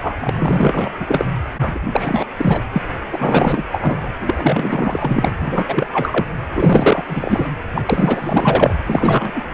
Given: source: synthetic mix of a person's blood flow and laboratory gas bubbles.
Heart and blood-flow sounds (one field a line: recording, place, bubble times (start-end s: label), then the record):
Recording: Doppler ultrasound of blood flow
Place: precordium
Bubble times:
0.02-0.15 s: bubbles
0.20-0.89 s: bubbles
0.98-1.27 s: bubbles
1.60-1.79 s: bubbles
1.92-2.27 s: bubbles
2.37-2.61 s: bubbles
2.72-2.82 s: bubbles
3.12-3.66 s: bubbles
3.71-4.08 s: bubbles
4.26-5.33 s: bubbles
5.41-5.87 s: bubbles
5.92-6.26 s: bubbles
6.54-7.03 s: bubbles
7.07-7.49 s: bubbles
7.73-7.82 s: bubbles
7.87-8.79 s: bubbles
8.86-9.42 s: bubbles
From the record:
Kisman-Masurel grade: 444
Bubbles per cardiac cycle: continuous sound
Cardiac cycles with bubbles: 100%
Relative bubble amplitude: maximal (0.775 to 0.999)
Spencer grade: 4 (maximum detectable bubble signal sounding continuously throughout systole and diastole of every cardiac period, and overriding the amplitude of the normal cardiac signals)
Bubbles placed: anywhere in the cardiac cycle